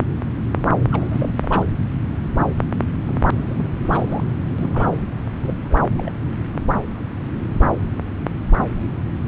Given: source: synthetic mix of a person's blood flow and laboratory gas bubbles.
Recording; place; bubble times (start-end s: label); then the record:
Doppler ultrasound of blood flow; subclavian vein
0.91-1.33 s: bubbles
1.42-1.65 s: bubbles
3.05-3.14 s: bubbles
3.32-3.56 s: bubbles
3.58-3.81 s: bubbles
3.85-4.24 s: bubbles
4.58-5.02 s: bubbles
5.43-5.83 s: bubbles
5.97-6.10 s: bubbles
From the record:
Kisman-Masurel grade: 221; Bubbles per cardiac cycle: several, 3 to 8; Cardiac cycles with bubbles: 10 to 50%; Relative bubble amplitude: barely perceptible (0.100 to 0.250); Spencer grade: 2 (many but less than half of the cardiac periods contain bubble signals, singularly or in groups); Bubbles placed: anywhere in the cardiac cycle